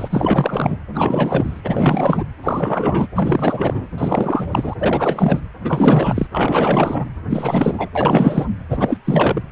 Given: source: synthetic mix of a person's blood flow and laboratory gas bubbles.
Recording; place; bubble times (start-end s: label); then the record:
Doppler ultrasound of blood flow; precordium
0.00-0.79 s: bubbles
0.93-1.60 s: bubbles
1.64-2.23 s: bubbles
2.43-3.07 s: bubbles
3.15-3.87 s: bubbles
3.97-4.73 s: bubbles
4.78-5.41 s: bubbles
5.64-6.27 s: bubbles
6.32-7.05 s: bubbles
7.29-7.90 s: bubbles
7.95-8.47 s: bubbles
8.70-8.98 s: bubbles
9.04-9.41 s: bubbles
From the record:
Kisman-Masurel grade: 444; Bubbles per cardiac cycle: continuous sound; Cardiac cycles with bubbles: 100%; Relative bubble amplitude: maximal (0.775 to 0.999); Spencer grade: 4 (maximum detectable bubble signal sounding continuously throughout systole and diastole of every cardiac period, and overriding the amplitude of the normal cardiac signals); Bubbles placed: anywhere in the cardiac cycle